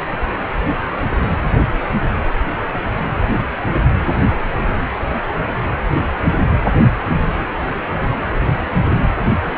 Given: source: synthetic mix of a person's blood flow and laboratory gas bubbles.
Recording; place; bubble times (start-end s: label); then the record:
Doppler ultrasound of blood flow; precordium
6.54-6.59 s: bubbles
9.46-9.50 s: bubbles
From the record:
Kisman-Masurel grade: 122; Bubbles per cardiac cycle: 1 to 2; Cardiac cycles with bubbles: 10 to 50%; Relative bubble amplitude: moderate (0.250 to 0.450); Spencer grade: 2 (many but less than half of the cardiac periods contain bubble signals, singularly or in groups); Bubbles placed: anywhere in the cardiac cycle